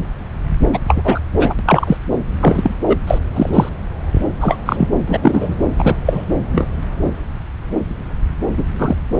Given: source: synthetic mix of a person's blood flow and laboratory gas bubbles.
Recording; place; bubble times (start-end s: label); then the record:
Doppler ultrasound of blood flow; subclavian vein
0.74-0.79 s: bubbles
0.87-1.20 s: bubbles
1.38-1.54 s: bubbles
1.58-1.97 s: bubbles
2.40-2.75 s: bubbles
2.87-2.97 s: bubbles
3.07-3.19 s: bubbles
3.33-3.69 s: bubbles
4.41-4.57 s: bubbles
4.66-4.87 s: bubbles
5.07-5.55 s: bubbles
5.77-5.95 s: bubbles
6.06-6.26 s: bubbles
6.52-6.67 s: bubbles
8.57-8.64 s: bubbles
8.78-8.96 s: bubbles
From the record:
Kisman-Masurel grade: 233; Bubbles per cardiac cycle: several, 3 to 8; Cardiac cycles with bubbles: 50 to 99%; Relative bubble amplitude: loud (0.450 to 0.775); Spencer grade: 3 (all of the cardiac periods contain showers or single bubble signals, but not dominating or overriding the cardiac motion signals); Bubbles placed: anywhere in the cardiac cycle